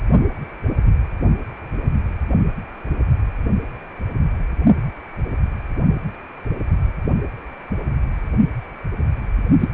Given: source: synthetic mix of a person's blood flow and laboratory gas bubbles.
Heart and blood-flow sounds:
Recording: Doppler ultrasound of blood flow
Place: precordium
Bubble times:
9.60-9.68 s: bubbles
From the record:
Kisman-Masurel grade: 213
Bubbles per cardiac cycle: several, 3 to 8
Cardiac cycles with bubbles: 1 to 10%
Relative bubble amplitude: loud (0.450 to 0.775)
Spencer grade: 1 (occasional bubble signal discernible with the cardiac motion signal, with majority of cardiac periods free of bubbles)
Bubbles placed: only in the low amplitude regions of the cardiac cycle

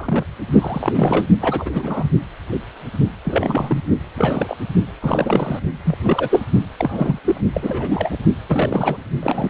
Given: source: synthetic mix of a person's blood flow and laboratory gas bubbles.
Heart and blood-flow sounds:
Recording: Doppler ultrasound of blood flow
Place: precordium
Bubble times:
0.00-0.24 s: bubbles
0.52-1.25 s: bubbles
1.40-1.69 s: bubbles
1.72-2.10 s: bubbles
3.24-3.83 s: bubbles
4.17-4.57 s: bubbles
5.00-5.59 s: bubbles
5.85-5.97 s: bubbles
6.03-6.46 s: bubbles
6.77-7.19 s: bubbles
7.25-7.41 s: bubbles
7.53-8.16 s: bubbles
8.47-8.97 s: bubbles
9.22-9.50 s: bubbles
From the record:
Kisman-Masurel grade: 342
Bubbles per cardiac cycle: rolling drumbeat, 9 or more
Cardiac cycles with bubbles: 100%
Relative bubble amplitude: moderate (0.250 to 0.450)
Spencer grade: 3 (all of the cardiac periods contain showers or single bubble signals, but not dominating or overriding the cardiac motion signals)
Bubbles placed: only in the low amplitude regions of the cardiac cycle

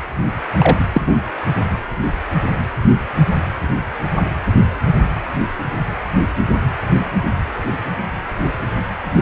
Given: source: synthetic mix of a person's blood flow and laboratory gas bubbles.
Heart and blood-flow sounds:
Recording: Doppler ultrasound of blood flow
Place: precordium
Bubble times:
0.58-0.85 s: bubbles
0.92-1.02 s: bubbles
1.06-1.16 s: bubbles
From the record:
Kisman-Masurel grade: 223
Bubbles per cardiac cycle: several, 3 to 8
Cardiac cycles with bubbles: 10 to 50%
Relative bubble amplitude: loud (0.450 to 0.775)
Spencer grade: 2 (many but less than half of the cardiac periods contain bubble signals, singularly or in groups)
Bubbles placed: anywhere in the cardiac cycle

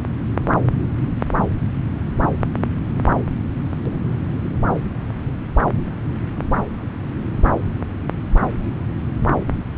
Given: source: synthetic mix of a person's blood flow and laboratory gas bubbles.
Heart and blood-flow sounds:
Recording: Doppler ultrasound of blood flow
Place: subclavian vein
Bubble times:
no bubbles
From the record:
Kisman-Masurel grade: 000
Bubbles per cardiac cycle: 0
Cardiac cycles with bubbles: 0%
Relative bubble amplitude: no bubbles discernible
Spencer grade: 0 (complete lack of bubble signals)

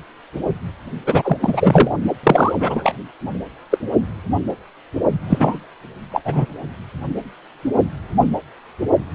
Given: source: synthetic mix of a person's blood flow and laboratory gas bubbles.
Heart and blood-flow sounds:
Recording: Doppler ultrasound of blood flow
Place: precordium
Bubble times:
1.06-1.38 s: bubbles
1.41-1.96 s: bubbles
2.23-2.53 s: bubbles
2.59-2.93 s: bubbles
3.70-3.78 s: bubbles
5.22-5.58 s: bubbles
6.12-6.21 s: bubbles
6.25-6.46 s: bubbles
From the record:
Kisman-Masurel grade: 223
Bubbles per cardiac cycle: several, 3 to 8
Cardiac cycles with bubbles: 10 to 50%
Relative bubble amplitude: loud (0.450 to 0.775)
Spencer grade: 2 (many but less than half of the cardiac periods contain bubble signals, singularly or in groups)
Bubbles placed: only in the low amplitude regions of the cardiac cycle

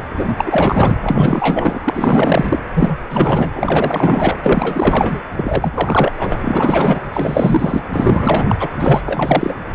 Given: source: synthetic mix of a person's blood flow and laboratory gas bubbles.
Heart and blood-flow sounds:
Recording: Doppler ultrasound of blood flow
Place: precordium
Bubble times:
0.00-0.02 s: bubbles
0.16-0.97 s: bubbles
1.03-1.82 s: bubbles
1.86-2.59 s: bubbles
2.73-2.97 s: bubbles
3.09-3.51 s: bubbles
3.55-4.39 s: bubbles
4.43-5.21 s: bubbles
5.36-5.72 s: bubbles
5.75-6.12 s: bubbles
6.19-7.00 s: bubbles
7.13-7.85 s: bubbles
7.91-8.45 s: bubbles
8.48-8.56 s: bubbles
8.60-8.68 s: bubbles
8.79-9.01 s: bubbles
9.06-9.62 s: bubbles
From the record:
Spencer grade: 4 (maximum detectable bubble signal sounding continuously throughout systole and diastole of every cardiac period, and overriding the amplitude of the normal cardiac signals)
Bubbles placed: anywhere in the cardiac cycle

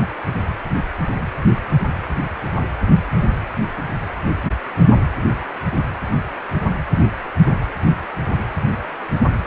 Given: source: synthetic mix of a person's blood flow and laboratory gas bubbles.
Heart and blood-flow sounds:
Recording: Doppler ultrasound of blood flow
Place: precordium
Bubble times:
no bubbles
From the record:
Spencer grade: 0 (complete lack of bubble signals)

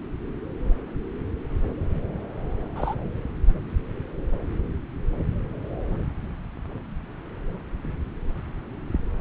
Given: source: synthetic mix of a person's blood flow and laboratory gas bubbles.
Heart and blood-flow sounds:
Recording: Doppler ultrasound of blood flow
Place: subclavian vein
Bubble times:
2.75-2.94 s: bubbles
From the record:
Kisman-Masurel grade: 111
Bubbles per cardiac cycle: 1 to 2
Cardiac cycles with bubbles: 1 to 10%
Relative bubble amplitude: barely perceptible (0.100 to 0.250)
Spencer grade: 1 (occasional bubble signal discernible with the cardiac motion signal, with majority of cardiac periods free of bubbles)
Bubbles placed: anywhere in the cardiac cycle

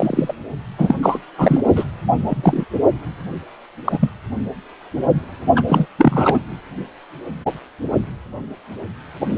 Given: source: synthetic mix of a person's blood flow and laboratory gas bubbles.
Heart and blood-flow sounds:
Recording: Doppler ultrasound of blood flow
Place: precordium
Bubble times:
0.00-0.34 s: bubbles
0.78-0.95 s: bubbles
1.02-1.18 s: bubbles
1.38-1.60 s: bubbles
1.75-1.84 s: bubbles
2.19-2.65 s: bubbles
3.84-4.10 s: bubbles
5.55-5.62 s: bubbles
5.67-5.87 s: bubbles
5.98-6.39 s: bubbles
From the record:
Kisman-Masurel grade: 233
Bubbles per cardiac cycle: several, 3 to 8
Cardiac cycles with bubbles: 50 to 99%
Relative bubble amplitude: loud (0.450 to 0.775)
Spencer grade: 3 (all of the cardiac periods contain showers or single bubble signals, but not dominating or overriding the cardiac motion signals)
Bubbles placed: only in the low amplitude regions of the cardiac cycle

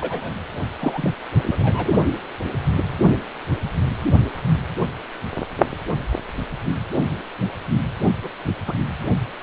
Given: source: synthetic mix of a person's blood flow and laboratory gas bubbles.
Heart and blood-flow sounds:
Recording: Doppler ultrasound of blood flow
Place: precordium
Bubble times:
0.00-0.31 s: bubbles
0.79-1.13 s: bubbles
1.42-1.90 s: bubbles
8.23-8.29 s: bubbles
8.67-8.73 s: bubbles
From the record:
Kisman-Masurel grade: 122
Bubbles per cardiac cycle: 1 to 2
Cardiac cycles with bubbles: 10 to 50%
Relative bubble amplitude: moderate (0.250 to 0.450)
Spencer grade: 2 (many but less than half of the cardiac periods contain bubble signals, singularly or in groups)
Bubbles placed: only in the low amplitude regions of the cardiac cycle

